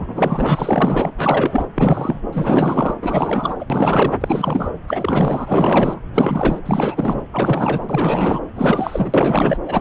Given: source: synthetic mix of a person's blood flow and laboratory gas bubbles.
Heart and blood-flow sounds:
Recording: Doppler ultrasound of blood flow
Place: subclavian vein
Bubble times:
0.00-1.11 s: bubbles
1.17-1.67 s: bubbles
1.74-2.20 s: bubbles
2.32-2.94 s: bubbles
3.01-3.66 s: bubbles
3.70-4.13 s: bubbles
4.20-4.71 s: bubbles
4.87-6.00 s: bubbles
6.14-6.60 s: bubbles
6.65-7.27 s: bubbles
7.32-8.39 s: bubbles
8.55-9.57 s: bubbles
9.65-9.81 s: bubbles
From the record:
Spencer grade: 4 (maximum detectable bubble signal sounding continuously throughout systole and diastole of every cardiac period, and overriding the amplitude of the normal cardiac signals)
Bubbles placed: anywhere in the cardiac cycle

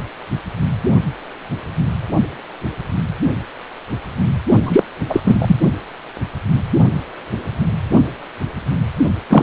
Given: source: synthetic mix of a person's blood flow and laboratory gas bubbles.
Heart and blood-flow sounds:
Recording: Doppler ultrasound of blood flow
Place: precordium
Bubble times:
4.64-4.83 s: bubbles
5.09-5.21 s: bubbles
5.23-5.56 s: bubbles
9.29-9.43 s: bubbles
From the record:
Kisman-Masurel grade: 223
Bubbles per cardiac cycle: several, 3 to 8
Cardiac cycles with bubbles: 10 to 50%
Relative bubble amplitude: loud (0.450 to 0.775)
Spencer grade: 2 (many but less than half of the cardiac periods contain bubble signals, singularly or in groups)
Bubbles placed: only in the low amplitude regions of the cardiac cycle

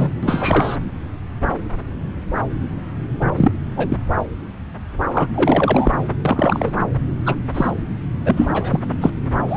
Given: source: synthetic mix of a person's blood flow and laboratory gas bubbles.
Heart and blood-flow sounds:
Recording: Doppler ultrasound of blood flow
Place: subclavian vein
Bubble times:
0.00-0.10 s: bubbles
0.22-0.78 s: bubbles
3.36-3.51 s: bubbles
3.77-3.97 s: bubbles
5.12-5.29 s: bubbles
5.34-5.93 s: bubbles
6.25-6.72 s: bubbles
7.25-7.36 s: bubbles
7.54-7.71 s: bubbles
8.25-8.32 s: bubbles
8.36-8.79 s: bubbles
9.00-9.10 s: bubbles
9.48-9.56 s: bubbles
From the record:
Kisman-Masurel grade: 233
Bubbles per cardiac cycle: several, 3 to 8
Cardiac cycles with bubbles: 50 to 99%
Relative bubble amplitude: loud (0.450 to 0.775)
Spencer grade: 3 (all of the cardiac periods contain showers or single bubble signals, but not dominating or overriding the cardiac motion signals)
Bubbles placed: anywhere in the cardiac cycle

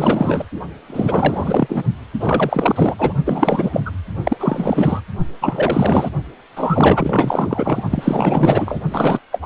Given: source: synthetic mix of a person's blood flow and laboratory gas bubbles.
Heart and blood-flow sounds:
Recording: Doppler ultrasound of blood flow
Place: precordium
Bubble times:
0.00-0.46 s: bubbles
0.87-1.83 s: bubbles
2.19-2.95 s: bubbles
2.98-3.14 s: bubbles
3.25-3.81 s: bubbles
3.85-3.91 s: bubbles
4.23-5.01 s: bubbles
5.41-6.10 s: bubbles
6.56-7.83 s: bubbles
7.90-8.81 s: bubbles
8.91-9.20 s: bubbles
9.32-9.46 s: bubbles
From the record:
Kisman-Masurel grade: 444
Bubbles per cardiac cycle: continuous sound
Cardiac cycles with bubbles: 100%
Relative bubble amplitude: maximal (0.775 to 0.999)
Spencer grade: 4 (maximum detectable bubble signal sounding continuously throughout systole and diastole of every cardiac period, and overriding the amplitude of the normal cardiac signals)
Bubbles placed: only in the low amplitude regions of the cardiac cycle

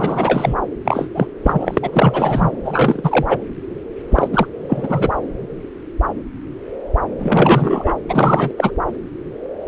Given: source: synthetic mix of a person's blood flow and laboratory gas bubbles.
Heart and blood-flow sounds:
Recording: Doppler ultrasound of blood flow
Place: subclavian vein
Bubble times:
0.00-0.55 s: bubbles
0.84-1.08 s: bubbles
1.14-1.27 s: bubbles
1.44-1.78 s: bubbles
1.82-2.51 s: bubbles
2.64-3.42 s: bubbles
4.10-4.28 s: bubbles
4.32-4.46 s: bubbles
4.68-5.11 s: bubbles
7.18-7.95 s: bubbles
8.09-8.53 s: bubbles
8.57-8.71 s: bubbles
From the record:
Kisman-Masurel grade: 333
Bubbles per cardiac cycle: rolling drumbeat, 9 or more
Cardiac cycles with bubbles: 50 to 99%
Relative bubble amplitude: loud (0.450 to 0.775)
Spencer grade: 3 (all of the cardiac periods contain showers or single bubble signals, but not dominating or overriding the cardiac motion signals)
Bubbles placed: anywhere in the cardiac cycle

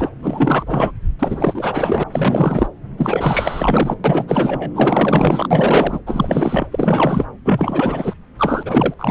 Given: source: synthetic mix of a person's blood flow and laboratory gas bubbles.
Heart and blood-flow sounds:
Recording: Doppler ultrasound of blood flow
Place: subclavian vein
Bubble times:
0.00-0.11 s: bubbles
0.22-0.64 s: bubbles
0.67-0.91 s: bubbles
1.19-2.04 s: bubbles
2.12-2.67 s: bubbles
2.97-3.96 s: bubbles
4.04-4.71 s: bubbles
4.75-5.48 s: bubbles
5.50-6.00 s: bubbles
6.07-6.66 s: bubbles
6.71-7.25 s: bubbles
7.44-8.14 s: bubbles
8.37-8.94 s: bubbles
8.99-9.11 s: bubbles
From the record:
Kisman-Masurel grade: 444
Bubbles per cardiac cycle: continuous sound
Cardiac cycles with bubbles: 100%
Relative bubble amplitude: maximal (0.775 to 0.999)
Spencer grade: 4 (maximum detectable bubble signal sounding continuously throughout systole and diastole of every cardiac period, and overriding the amplitude of the normal cardiac signals)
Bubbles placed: anywhere in the cardiac cycle

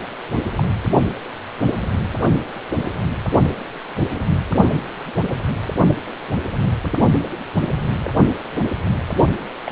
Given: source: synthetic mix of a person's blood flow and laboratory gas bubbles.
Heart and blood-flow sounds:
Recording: Doppler ultrasound of blood flow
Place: precordium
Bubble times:
0.58-0.63 s: bubbles
8.04-8.10 s: bubbles
9.66-9.72 s: bubbles
From the record:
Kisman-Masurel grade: 121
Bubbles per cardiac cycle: 1 to 2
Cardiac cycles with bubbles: 10 to 50%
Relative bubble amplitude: barely perceptible (0.100 to 0.250)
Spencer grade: 2 (many but less than half of the cardiac periods contain bubble signals, singularly or in groups)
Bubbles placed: only in the low amplitude regions of the cardiac cycle

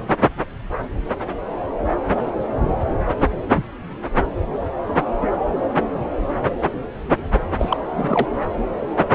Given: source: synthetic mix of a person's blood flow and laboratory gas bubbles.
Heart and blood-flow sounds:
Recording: Doppler ultrasound of blood flow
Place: subclavian vein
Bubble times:
7.58-7.77 s: bubbles
7.98-8.28 s: bubbles
From the record:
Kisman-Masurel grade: 212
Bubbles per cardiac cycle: several, 3 to 8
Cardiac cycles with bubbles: 1 to 10%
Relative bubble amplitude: moderate (0.250 to 0.450)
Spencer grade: 1 (occasional bubble signal discernible with the cardiac motion signal, with majority of cardiac periods free of bubbles)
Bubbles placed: anywhere in the cardiac cycle

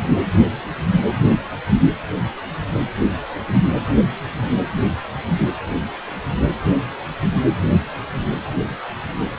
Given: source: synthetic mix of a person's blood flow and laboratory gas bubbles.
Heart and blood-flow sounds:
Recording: Doppler ultrasound of blood flow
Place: precordium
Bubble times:
no bubbles
From the record:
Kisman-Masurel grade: 000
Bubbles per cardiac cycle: 0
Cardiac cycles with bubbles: 0%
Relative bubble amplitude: no bubbles discernible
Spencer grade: 0 (complete lack of bubble signals)

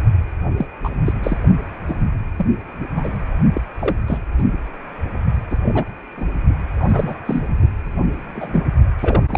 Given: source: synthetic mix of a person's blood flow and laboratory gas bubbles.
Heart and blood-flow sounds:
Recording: Doppler ultrasound of blood flow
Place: precordium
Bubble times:
0.56-0.67 s: bubbles
0.83-0.89 s: bubbles
1.05-1.12 s: bubbles
1.23-1.37 s: bubbles
1.88-2.02 s: bubbles
2.38-2.46 s: bubbles
2.96-3.17 s: bubbles
3.54-3.61 s: bubbles
3.79-3.96 s: bubbles
4.07-4.18 s: bubbles
4.38-4.43 s: bubbles
5.50-5.56 s: bubbles
5.63-5.84 s: bubbles
6.17-6.25 s: bubbles
6.75-7.17 s: bubbles
7.25-7.44 s: bubbles
8.34-8.63 s: bubbles
8.98-9.38 s: bubbles
From the record:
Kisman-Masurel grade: 242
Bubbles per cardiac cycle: several, 3 to 8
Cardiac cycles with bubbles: 100%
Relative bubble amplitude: moderate (0.250 to 0.450)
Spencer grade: 3 (all of the cardiac periods contain showers or single bubble signals, but not dominating or overriding the cardiac motion signals)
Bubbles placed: only in the low amplitude regions of the cardiac cycle

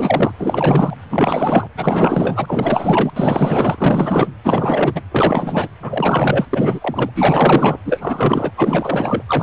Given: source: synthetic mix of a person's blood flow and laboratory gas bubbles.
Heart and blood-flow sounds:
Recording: Doppler ultrasound of blood flow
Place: precordium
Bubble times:
0.00-0.32 s: bubbles
0.38-0.95 s: bubbles
1.09-1.67 s: bubbles
1.77-3.11 s: bubbles
3.16-4.28 s: bubbles
4.44-5.00 s: bubbles
5.11-5.69 s: bubbles
5.82-6.46 s: bubbles
6.52-7.11 s: bubbles
7.15-7.78 s: bubbles
7.84-8.51 s: bubbles
8.57-9.23 s: bubbles
9.28-9.43 s: bubbles
From the record:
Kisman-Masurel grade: 444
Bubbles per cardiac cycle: continuous sound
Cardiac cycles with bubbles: 100%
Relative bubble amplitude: maximal (0.775 to 0.999)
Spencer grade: 4 (maximum detectable bubble signal sounding continuously throughout systole and diastole of every cardiac period, and overriding the amplitude of the normal cardiac signals)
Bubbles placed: anywhere in the cardiac cycle

